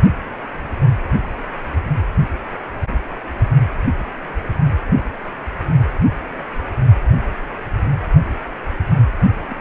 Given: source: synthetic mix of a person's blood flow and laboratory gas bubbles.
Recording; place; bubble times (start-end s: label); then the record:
Doppler ultrasound of blood flow; precordium
9.41-9.45 s: bubbles
9.48-9.56 s: bubbles
From the record:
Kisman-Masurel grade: 121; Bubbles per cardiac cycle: 1 to 2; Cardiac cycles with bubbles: 10 to 50%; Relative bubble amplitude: barely perceptible (0.100 to 0.250); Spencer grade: 2 (many but less than half of the cardiac periods contain bubble signals, singularly or in groups); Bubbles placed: only in the low amplitude regions of the cardiac cycle